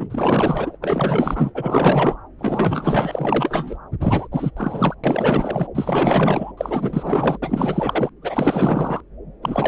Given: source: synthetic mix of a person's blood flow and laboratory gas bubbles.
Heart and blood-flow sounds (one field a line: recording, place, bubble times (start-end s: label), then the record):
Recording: Doppler ultrasound of blood flow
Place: subclavian vein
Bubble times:
0.00-0.77 s: bubbles
0.81-1.52 s: bubbles
1.54-2.17 s: bubbles
2.38-3.77 s: bubbles
4.01-4.28 s: bubbles
4.31-4.51 s: bubbles
4.57-4.95 s: bubbles
5.04-5.67 s: bubbles
5.75-6.52 s: bubbles
6.57-7.38 s: bubbles
7.42-8.10 s: bubbles
8.22-9.02 s: bubbles
9.42-9.68 s: bubbles
From the record:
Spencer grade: 4 (maximum detectable bubble signal sounding continuously throughout systole and diastole of every cardiac period, and overriding the amplitude of the normal cardiac signals)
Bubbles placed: anywhere in the cardiac cycle